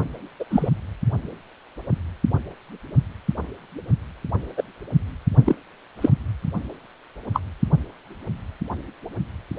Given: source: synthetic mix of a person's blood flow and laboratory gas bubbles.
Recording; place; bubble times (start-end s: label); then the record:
Doppler ultrasound of blood flow; precordium
0.40-0.45 s: bubbles
0.50-0.70 s: bubbles
4.57-4.63 s: bubbles
5.45-5.56 s: bubbles
6.01-6.09 s: bubbles
7.33-7.41 s: bubbles
From the record:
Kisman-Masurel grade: 123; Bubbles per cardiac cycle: 1 to 2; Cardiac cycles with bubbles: 10 to 50%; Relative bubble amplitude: loud (0.450 to 0.775); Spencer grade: 2 (many but less than half of the cardiac periods contain bubble signals, singularly or in groups); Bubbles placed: only in the low amplitude regions of the cardiac cycle